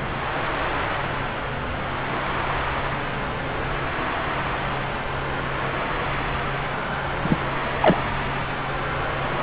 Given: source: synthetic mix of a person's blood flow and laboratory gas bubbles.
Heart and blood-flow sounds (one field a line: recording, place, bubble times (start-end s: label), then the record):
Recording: Doppler ultrasound of blood flow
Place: subclavian vein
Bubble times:
7.22-7.38 s: bubbles
7.69-8.03 s: bubbles
From the record:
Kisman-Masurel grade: 113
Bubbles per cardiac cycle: 1 to 2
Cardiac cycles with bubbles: 1 to 10%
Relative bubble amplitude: loud (0.450 to 0.775)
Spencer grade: 1 (occasional bubble signal discernible with the cardiac motion signal, with majority of cardiac periods free of bubbles)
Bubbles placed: anywhere in the cardiac cycle